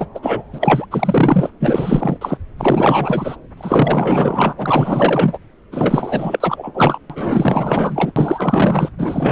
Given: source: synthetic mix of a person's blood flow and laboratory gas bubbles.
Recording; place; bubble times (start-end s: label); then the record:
Doppler ultrasound of blood flow; subclavian vein
0.00-0.06 s: bubbles
0.14-0.20 s: bubbles
0.23-0.43 s: bubbles
0.53-0.85 s: bubbles
0.91-1.50 s: bubbles
1.60-2.17 s: bubbles
2.21-2.37 s: bubbles
2.58-3.36 s: bubbles
3.57-4.53 s: bubbles
4.57-5.38 s: bubbles
5.71-6.71 s: bubbles
6.74-6.98 s: bubbles
7.09-8.12 s: bubbles
8.16-8.91 s: bubbles
8.98-9.31 s: bubbles
From the record:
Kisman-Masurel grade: 444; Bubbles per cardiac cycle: continuous sound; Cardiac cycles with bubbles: 100%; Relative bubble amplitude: maximal (0.775 to 0.999); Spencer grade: 4 (maximum detectable bubble signal sounding continuously throughout systole and diastole of every cardiac period, and overriding the amplitude of the normal cardiac signals); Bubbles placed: anywhere in the cardiac cycle